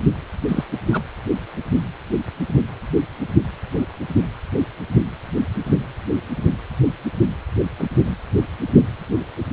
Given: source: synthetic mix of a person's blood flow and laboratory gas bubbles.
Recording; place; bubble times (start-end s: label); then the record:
Doppler ultrasound of blood flow; precordium
0.48-0.64 s: bubbles
0.92-1.02 s: bubbles
7.79-7.87 s: bubbles
7.96-8.16 s: bubbles
From the record:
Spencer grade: 2 (many but less than half of the cardiac periods contain bubble signals, singularly or in groups); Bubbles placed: anywhere in the cardiac cycle